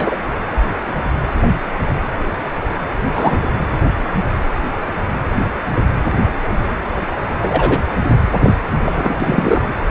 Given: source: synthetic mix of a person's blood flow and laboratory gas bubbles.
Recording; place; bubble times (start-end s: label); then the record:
Doppler ultrasound of blood flow; precordium
0.00-0.15 s: bubbles
3.13-3.40 s: bubbles
7.40-7.83 s: bubbles
8.40-8.54 s: bubbles
8.84-9.15 s: bubbles
9.20-9.64 s: bubbles
From the record:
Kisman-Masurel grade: 123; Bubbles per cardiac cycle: 1 to 2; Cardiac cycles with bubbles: 10 to 50%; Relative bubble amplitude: loud (0.450 to 0.775); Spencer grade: 2 (many but less than half of the cardiac periods contain bubble signals, singularly or in groups); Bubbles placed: anywhere in the cardiac cycle